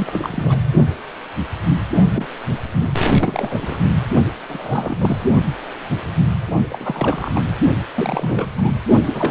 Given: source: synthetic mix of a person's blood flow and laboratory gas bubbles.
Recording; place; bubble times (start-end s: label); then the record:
Doppler ultrasound of blood flow; precordium
0.00-0.60 s: bubbles
2.12-2.27 s: bubbles
2.50-2.58 s: bubbles
2.81-2.90 s: bubbles
3.08-3.13 s: bubbles
3.19-3.82 s: bubbles
4.47-5.24 s: bubbles
6.69-7.52 s: bubbles
7.95-8.52 s: bubbles
8.57-8.76 s: bubbles
9.04-9.31 s: bubbles
From the record:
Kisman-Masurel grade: 332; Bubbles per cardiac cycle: rolling drumbeat, 9 or more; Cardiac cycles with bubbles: 50 to 99%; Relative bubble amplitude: moderate (0.250 to 0.450); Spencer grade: 3 (all of the cardiac periods contain showers or single bubble signals, but not dominating or overriding the cardiac motion signals); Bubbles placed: only in the low amplitude regions of the cardiac cycle